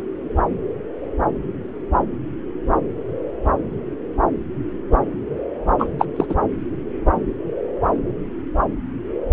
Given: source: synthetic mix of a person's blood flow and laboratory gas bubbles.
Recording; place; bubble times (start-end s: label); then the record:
Doppler ultrasound of blood flow; subclavian vein
5.79-5.90 s: bubbles
5.98-6.06 s: bubbles
6.16-6.25 s: bubbles
6.29-6.34 s: bubbles
From the record:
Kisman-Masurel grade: 213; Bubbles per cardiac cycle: several, 3 to 8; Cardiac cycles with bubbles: 1 to 10%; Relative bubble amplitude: loud (0.450 to 0.775); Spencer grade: 1 (occasional bubble signal discernible with the cardiac motion signal, with majority of cardiac periods free of bubbles); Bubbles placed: anywhere in the cardiac cycle